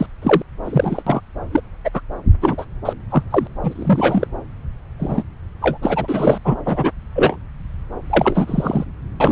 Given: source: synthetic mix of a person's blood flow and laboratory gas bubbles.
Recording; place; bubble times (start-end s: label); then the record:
Doppler ultrasound of blood flow; subclavian vein
0.00-0.06 s: bubbles
0.21-0.42 s: bubbles
0.65-1.02 s: bubbles
1.06-1.21 s: bubbles
1.52-1.61 s: bubbles
1.84-1.90 s: bubbles
1.93-2.00 s: bubbles
2.42-2.65 s: bubbles
2.85-2.93 s: bubbles
3.10-3.23 s: bubbles
3.30-3.47 s: bubbles
3.62-4.27 s: bubbles
5.00-5.23 s: bubbles
5.61-5.77 s: bubbles
5.82-6.38 s: bubbles
6.44-6.55 s: bubbles
6.65-6.90 s: bubbles
7.15-7.37 s: bubbles
8.10-8.85 s: bubbles
9.20-9.32 s: bubbles
From the record:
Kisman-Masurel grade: 243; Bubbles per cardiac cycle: several, 3 to 8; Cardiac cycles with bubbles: 100%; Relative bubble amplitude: loud (0.450 to 0.775); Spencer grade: 3 (all of the cardiac periods contain showers or single bubble signals, but not dominating or overriding the cardiac motion signals); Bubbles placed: anywhere in the cardiac cycle